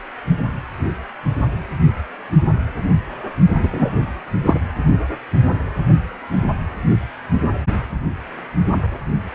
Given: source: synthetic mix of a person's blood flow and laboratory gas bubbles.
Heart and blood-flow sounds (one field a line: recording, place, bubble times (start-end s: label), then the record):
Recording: Doppler ultrasound of blood flow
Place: precordium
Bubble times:
3.62-3.90 s: bubbles
4.45-4.60 s: bubbles
From the record:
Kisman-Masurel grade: 223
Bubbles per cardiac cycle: several, 3 to 8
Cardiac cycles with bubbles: 10 to 50%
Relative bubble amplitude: loud (0.450 to 0.775)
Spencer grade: 2 (many but less than half of the cardiac periods contain bubble signals, singularly or in groups)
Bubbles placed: only in the low amplitude regions of the cardiac cycle